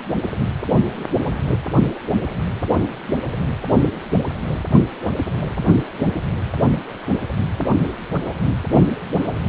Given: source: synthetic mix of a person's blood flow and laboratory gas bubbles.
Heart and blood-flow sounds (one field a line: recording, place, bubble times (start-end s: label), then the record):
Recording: Doppler ultrasound of blood flow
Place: precordium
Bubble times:
no bubbles
From the record:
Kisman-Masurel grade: 000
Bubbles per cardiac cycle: 0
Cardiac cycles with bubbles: 0%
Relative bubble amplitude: no bubbles discernible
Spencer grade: 0 (complete lack of bubble signals)